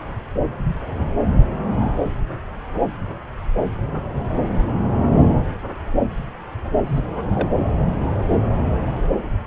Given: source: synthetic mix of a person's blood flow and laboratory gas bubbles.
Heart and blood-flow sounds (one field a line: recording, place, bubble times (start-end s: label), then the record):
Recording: Doppler ultrasound of blood flow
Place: subclavian vein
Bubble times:
6.86-7.02 s: bubbles
7.35-7.49 s: bubbles
From the record:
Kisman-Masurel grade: 221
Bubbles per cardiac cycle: several, 3 to 8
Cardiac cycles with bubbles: 10 to 50%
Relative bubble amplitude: barely perceptible (0.100 to 0.250)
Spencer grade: 2 (many but less than half of the cardiac periods contain bubble signals, singularly or in groups)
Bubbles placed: anywhere in the cardiac cycle